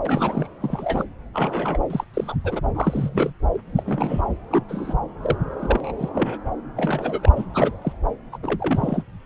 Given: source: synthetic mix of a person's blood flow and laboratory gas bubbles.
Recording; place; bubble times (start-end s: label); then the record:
Doppler ultrasound of blood flow; subclavian vein
0.05-0.48 s: bubbles
0.60-1.04 s: bubbles
1.33-1.79 s: bubbles
1.90-2.04 s: bubbles
2.13-2.35 s: bubbles
2.44-2.60 s: bubbles
2.75-3.32 s: bubbles
3.55-3.58 s: bubbles
3.75-4.21 s: bubbles
4.51-4.64 s: bubbles
4.69-4.94 s: bubbles
5.22-5.36 s: bubbles
5.60-5.92 s: bubbles
5.98-6.10 s: bubbles
6.14-6.38 s: bubbles
6.77-7.21 s: bubbles
7.23-7.33 s: bubbles
7.36-7.45 s: bubbles
7.54-7.77 s: bubbles
7.82-7.92 s: bubbles
8.32-8.38 s: bubbles
8.42-9.03 s: bubbles
From the record:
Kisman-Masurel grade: 242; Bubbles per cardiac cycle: several, 3 to 8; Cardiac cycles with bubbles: 100%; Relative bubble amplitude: moderate (0.250 to 0.450); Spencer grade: 3 (all of the cardiac periods contain showers or single bubble signals, but not dominating or overriding the cardiac motion signals); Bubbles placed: anywhere in the cardiac cycle